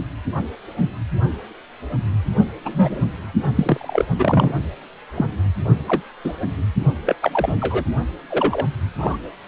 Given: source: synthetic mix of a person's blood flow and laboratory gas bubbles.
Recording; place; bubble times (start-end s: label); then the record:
Doppler ultrasound of blood flow; precordium
2.65-3.03 s: bubbles
3.55-4.05 s: bubbles
4.18-4.58 s: bubbles
5.17-5.25 s: bubbles
5.78-6.08 s: bubbles
6.24-6.33 s: bubbles
7.05-7.16 s: bubbles
7.22-7.54 s: bubbles
7.61-7.84 s: bubbles
8.29-8.65 s: bubbles
8.98-9.17 s: bubbles
From the record:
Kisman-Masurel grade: 232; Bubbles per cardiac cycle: several, 3 to 8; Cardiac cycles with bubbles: 50 to 99%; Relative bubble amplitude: moderate (0.250 to 0.450); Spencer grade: 3 (all of the cardiac periods contain showers or single bubble signals, but not dominating or overriding the cardiac motion signals); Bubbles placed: only in the low amplitude regions of the cardiac cycle